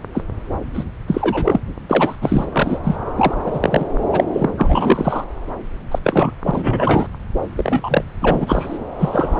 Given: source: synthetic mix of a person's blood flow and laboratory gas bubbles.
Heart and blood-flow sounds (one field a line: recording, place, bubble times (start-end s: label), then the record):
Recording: Doppler ultrasound of blood flow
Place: subclavian vein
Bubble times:
0.14-0.24 s: bubbles
0.73-0.84 s: bubbles
1.07-1.60 s: bubbles
1.90-2.15 s: bubbles
2.21-2.45 s: bubbles
2.52-2.79 s: bubbles
2.83-2.96 s: bubbles
3.17-3.34 s: bubbles
3.44-3.84 s: bubbles
4.12-4.24 s: bubbles
4.33-4.50 s: bubbles
4.58-5.24 s: bubbles
5.91-5.99 s: bubbles
6.04-6.31 s: bubbles
6.45-7.06 s: bubbles
7.56-8.04 s: bubbles
8.21-8.78 s: bubbles
8.98-9.40 s: bubbles
From the record:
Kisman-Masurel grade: 243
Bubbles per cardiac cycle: several, 3 to 8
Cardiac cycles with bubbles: 100%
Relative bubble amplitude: loud (0.450 to 0.775)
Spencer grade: 3 (all of the cardiac periods contain showers or single bubble signals, but not dominating or overriding the cardiac motion signals)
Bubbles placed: anywhere in the cardiac cycle